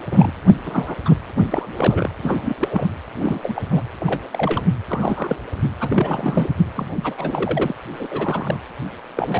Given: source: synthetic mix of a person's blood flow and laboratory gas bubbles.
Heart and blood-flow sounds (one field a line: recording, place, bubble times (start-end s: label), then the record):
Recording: Doppler ultrasound of blood flow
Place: precordium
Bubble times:
0.11-0.32 s: bubbles
0.65-0.95 s: bubbles
1.05-1.15 s: bubbles
1.51-2.10 s: bubbles
2.22-2.56 s: bubbles
2.60-2.94 s: bubbles
3.14-3.40 s: bubbles
3.42-3.62 s: bubbles
3.71-3.83 s: bubbles
4.00-4.21 s: bubbles
4.31-4.63 s: bubbles
4.88-5.37 s: bubbles
5.80-6.50 s: bubbles
6.75-7.14 s: bubbles
7.17-7.72 s: bubbles
7.93-8.06 s: bubbles
8.11-8.59 s: bubbles
9.15-9.40 s: bubbles
From the record:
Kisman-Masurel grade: 242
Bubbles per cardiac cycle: several, 3 to 8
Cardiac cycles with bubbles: 100%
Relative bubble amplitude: moderate (0.250 to 0.450)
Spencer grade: 3 (all of the cardiac periods contain showers or single bubble signals, but not dominating or overriding the cardiac motion signals)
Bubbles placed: anywhere in the cardiac cycle